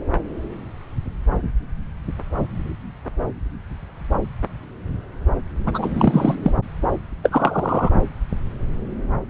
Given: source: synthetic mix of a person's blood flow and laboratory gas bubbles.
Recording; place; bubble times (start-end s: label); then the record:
Doppler ultrasound of blood flow; subclavian vein
5.65-6.35 s: bubbles
6.43-6.51 s: bubbles
7.22-7.93 s: bubbles
From the record:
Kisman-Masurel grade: 223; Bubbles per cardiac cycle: several, 3 to 8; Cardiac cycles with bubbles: 10 to 50%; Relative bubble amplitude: loud (0.450 to 0.775); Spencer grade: 2 (many but less than half of the cardiac periods contain bubble signals, singularly or in groups); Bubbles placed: anywhere in the cardiac cycle